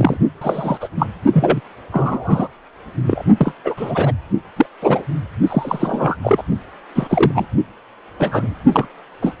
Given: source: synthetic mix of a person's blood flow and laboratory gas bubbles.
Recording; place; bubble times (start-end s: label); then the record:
Doppler ultrasound of blood flow; precordium
0.00-0.17 s: bubbles
0.41-0.88 s: bubbles
0.96-1.07 s: bubbles
1.33-1.60 s: bubbles
1.92-2.48 s: bubbles
3.06-3.23 s: bubbles
3.37-3.53 s: bubbles
3.64-3.74 s: bubbles
3.76-4.12 s: bubbles
4.56-4.66 s: bubbles
4.81-5.04 s: bubbles
5.47-6.16 s: bubbles
6.22-6.43 s: bubbles
6.95-7.47 s: bubbles
8.19-8.54 s: bubbles
8.72-8.88 s: bubbles
9.22-9.35 s: bubbles
From the record:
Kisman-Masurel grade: 243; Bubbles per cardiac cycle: several, 3 to 8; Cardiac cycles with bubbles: 100%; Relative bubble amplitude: loud (0.450 to 0.775); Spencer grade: 3 (all of the cardiac periods contain showers or single bubble signals, but not dominating or overriding the cardiac motion signals); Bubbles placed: only in the low amplitude regions of the cardiac cycle